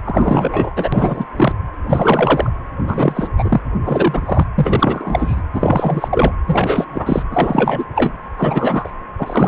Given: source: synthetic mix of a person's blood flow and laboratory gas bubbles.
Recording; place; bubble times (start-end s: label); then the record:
Doppler ultrasound of blood flow; precordium
0.04-0.89 s: bubbles
0.92-1.25 s: bubbles
1.37-1.52 s: bubbles
1.88-2.50 s: bubbles
2.82-3.29 s: bubbles
3.38-3.60 s: bubbles
3.84-4.47 s: bubbles
4.58-5.42 s: bubbles
5.54-6.08 s: bubbles
6.10-6.33 s: bubbles
6.46-7.23 s: bubbles
7.30-7.85 s: bubbles
7.95-8.12 s: bubbles
8.38-8.91 s: bubbles
9.19-9.48 s: bubbles
From the record:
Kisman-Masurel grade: 343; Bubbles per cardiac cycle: rolling drumbeat, 9 or more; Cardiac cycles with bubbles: 100%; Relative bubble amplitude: loud (0.450 to 0.775); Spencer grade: 3 (all of the cardiac periods contain showers or single bubble signals, but not dominating or overriding the cardiac motion signals); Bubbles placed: anywhere in the cardiac cycle